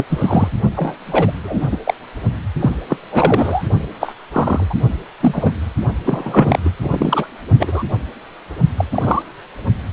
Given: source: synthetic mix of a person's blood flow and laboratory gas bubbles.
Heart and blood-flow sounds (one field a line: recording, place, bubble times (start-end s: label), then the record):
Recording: Doppler ultrasound of blood flow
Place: precordium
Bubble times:
0.00-0.05 s: bubbles
0.09-0.48 s: bubbles
0.75-1.32 s: bubbles
1.44-1.78 s: bubbles
1.84-1.94 s: bubbles
2.60-2.75 s: bubbles
2.89-2.97 s: bubbles
3.11-3.69 s: bubbles
4.00-4.15 s: bubbles
4.33-4.64 s: bubbles
4.70-4.75 s: bubbles
5.21-5.51 s: bubbles
6.04-6.58 s: bubbles
6.64-6.70 s: bubbles
6.82-7.26 s: bubbles
7.59-7.83 s: bubbles
8.77-8.85 s: bubbles
8.92-9.23 s: bubbles
From the record:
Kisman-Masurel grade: 243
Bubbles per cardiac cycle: several, 3 to 8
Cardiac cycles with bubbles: 100%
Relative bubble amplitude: loud (0.450 to 0.775)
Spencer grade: 3 (all of the cardiac periods contain showers or single bubble signals, but not dominating or overriding the cardiac motion signals)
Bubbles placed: only in the low amplitude regions of the cardiac cycle